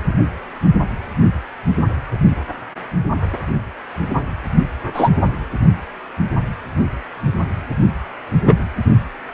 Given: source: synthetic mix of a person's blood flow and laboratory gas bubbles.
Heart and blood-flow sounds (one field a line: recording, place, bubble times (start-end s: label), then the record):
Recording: Doppler ultrasound of blood flow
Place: precordium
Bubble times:
4.94-5.09 s: bubbles
8.45-8.55 s: bubbles
From the record:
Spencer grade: 2 (many but less than half of the cardiac periods contain bubble signals, singularly or in groups)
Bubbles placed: only in the low amplitude regions of the cardiac cycle